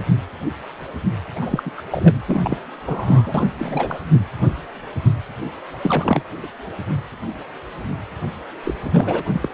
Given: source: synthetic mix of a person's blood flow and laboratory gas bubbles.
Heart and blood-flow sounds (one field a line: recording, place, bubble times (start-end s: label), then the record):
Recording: Doppler ultrasound of blood flow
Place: precordium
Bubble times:
1.35-1.72 s: bubbles
1.77-1.83 s: bubbles
1.90-2.14 s: bubbles
2.25-2.57 s: bubbles
2.85-3.47 s: bubbles
3.58-3.99 s: bubbles
5.82-6.22 s: bubbles
6.42-6.47 s: bubbles
8.63-8.74 s: bubbles
8.81-8.90 s: bubbles
8.93-9.22 s: bubbles
9.33-9.49 s: bubbles
From the record:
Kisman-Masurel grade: 332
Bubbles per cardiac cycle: rolling drumbeat, 9 or more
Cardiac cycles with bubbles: 50 to 99%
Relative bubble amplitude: moderate (0.250 to 0.450)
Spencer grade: 3 (all of the cardiac periods contain showers or single bubble signals, but not dominating or overriding the cardiac motion signals)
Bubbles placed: anywhere in the cardiac cycle